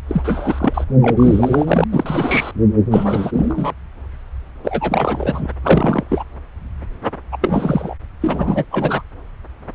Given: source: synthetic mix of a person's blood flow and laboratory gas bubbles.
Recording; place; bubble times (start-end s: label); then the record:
Doppler ultrasound of blood flow; subclavian vein
0.08-0.84 s: bubbles
1.01-1.84 s: bubbles
1.90-2.51 s: bubbles
2.90-3.73 s: bubbles
4.64-5.48 s: bubbles
5.62-6.04 s: bubbles
6.10-6.24 s: bubbles
7.32-7.37 s: bubbles
7.41-7.95 s: bubbles
8.21-8.64 s: bubbles
8.71-9.02 s: bubbles
From the record:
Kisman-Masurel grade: 333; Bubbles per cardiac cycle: rolling drumbeat, 9 or more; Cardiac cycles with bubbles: 50 to 99%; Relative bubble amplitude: loud (0.450 to 0.775); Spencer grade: 3 (all of the cardiac periods contain showers or single bubble signals, but not dominating or overriding the cardiac motion signals); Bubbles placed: anywhere in the cardiac cycle